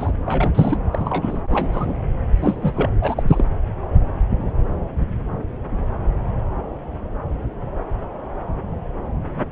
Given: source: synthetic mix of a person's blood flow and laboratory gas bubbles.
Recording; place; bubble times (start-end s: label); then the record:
Doppler ultrasound of blood flow; subclavian vein
0.00-0.13 s: bubbles
0.25-0.78 s: bubbles
0.92-1.41 s: bubbles
1.50-2.02 s: bubbles
2.36-2.89 s: bubbles
3.00-3.23 s: bubbles
3.27-3.44 s: bubbles
From the record:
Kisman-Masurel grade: 222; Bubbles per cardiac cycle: several, 3 to 8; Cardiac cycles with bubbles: 10 to 50%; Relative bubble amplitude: moderate (0.250 to 0.450); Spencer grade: 2 (many but less than half of the cardiac periods contain bubble signals, singularly or in groups); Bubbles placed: anywhere in the cardiac cycle